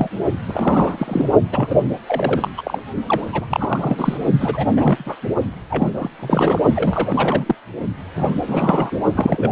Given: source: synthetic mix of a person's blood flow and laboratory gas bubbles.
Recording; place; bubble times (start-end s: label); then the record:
Doppler ultrasound of blood flow; precordium
0.00-0.10 s: bubbles
0.46-1.31 s: bubbles
1.52-1.80 s: bubbles
2.06-2.48 s: bubbles
2.57-2.80 s: bubbles
3.06-3.46 s: bubbles
3.48-4.17 s: bubbles
4.40-4.67 s: bubbles
4.76-5.15 s: bubbles
5.70-6.11 s: bubbles
6.19-6.62 s: bubbles
6.74-7.55 s: bubbles
8.16-8.35 s: bubbles
8.46-8.97 s: bubbles
9.15-9.52 s: bubbles
From the record:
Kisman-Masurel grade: 343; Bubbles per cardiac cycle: rolling drumbeat, 9 or more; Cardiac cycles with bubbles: 100%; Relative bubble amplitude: loud (0.450 to 0.775); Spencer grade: 3 (all of the cardiac periods contain showers or single bubble signals, but not dominating or overriding the cardiac motion signals); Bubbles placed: only in the low amplitude regions of the cardiac cycle